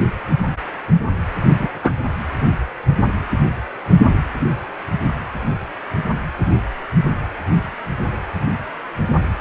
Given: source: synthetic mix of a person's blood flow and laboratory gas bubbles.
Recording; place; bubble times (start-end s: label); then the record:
Doppler ultrasound of blood flow; precordium
1.58-1.68 s: bubbles
1.83-1.92 s: bubbles
From the record:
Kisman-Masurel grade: 113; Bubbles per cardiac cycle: 1 to 2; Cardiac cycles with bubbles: 1 to 10%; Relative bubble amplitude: loud (0.450 to 0.775); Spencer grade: 1 (occasional bubble signal discernible with the cardiac motion signal, with majority of cardiac periods free of bubbles); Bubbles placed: anywhere in the cardiac cycle